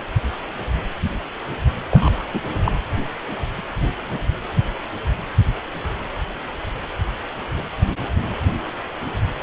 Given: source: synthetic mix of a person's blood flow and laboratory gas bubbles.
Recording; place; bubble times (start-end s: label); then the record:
Doppler ultrasound of blood flow; precordium
1.91-2.26 s: bubbles
2.33-2.40 s: bubbles
2.65-2.72 s: bubbles
From the record:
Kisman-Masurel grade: 222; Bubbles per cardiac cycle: several, 3 to 8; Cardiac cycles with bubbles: 10 to 50%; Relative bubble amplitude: moderate (0.250 to 0.450); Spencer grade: 2 (many but less than half of the cardiac periods contain bubble signals, singularly or in groups); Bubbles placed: anywhere in the cardiac cycle